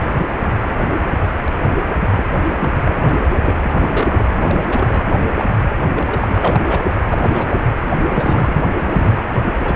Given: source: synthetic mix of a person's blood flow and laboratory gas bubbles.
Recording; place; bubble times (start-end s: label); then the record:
Doppler ultrasound of blood flow; precordium
2.11-2.23 s: bubbles
2.59-2.70 s: bubbles
2.85-3.19 s: bubbles
3.40-4.23 s: bubbles
4.34-4.59 s: bubbles
4.72-5.14 s: bubbles
5.31-5.45 s: bubbles
5.90-6.65 s: bubbles
6.68-6.83 s: bubbles
7.08-7.62 s: bubbles
8.10-8.64 s: bubbles
8.76-9.25 s: bubbles
9.33-9.42 s: bubbles
9.45-9.75 s: bubbles
From the record:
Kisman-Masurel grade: 332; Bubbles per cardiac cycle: rolling drumbeat, 9 or more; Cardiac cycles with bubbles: 50 to 99%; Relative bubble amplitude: moderate (0.250 to 0.450); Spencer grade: 3 (all of the cardiac periods contain showers or single bubble signals, but not dominating or overriding the cardiac motion signals); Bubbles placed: anywhere in the cardiac cycle